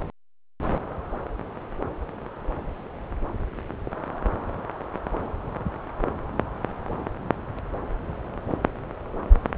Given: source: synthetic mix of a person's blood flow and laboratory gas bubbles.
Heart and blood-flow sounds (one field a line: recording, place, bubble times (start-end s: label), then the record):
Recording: Doppler ultrasound of blood flow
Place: subclavian vein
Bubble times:
no bubbles
From the record:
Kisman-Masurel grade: 000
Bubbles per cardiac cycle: 0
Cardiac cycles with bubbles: 0%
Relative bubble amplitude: no bubbles discernible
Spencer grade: 0 (complete lack of bubble signals)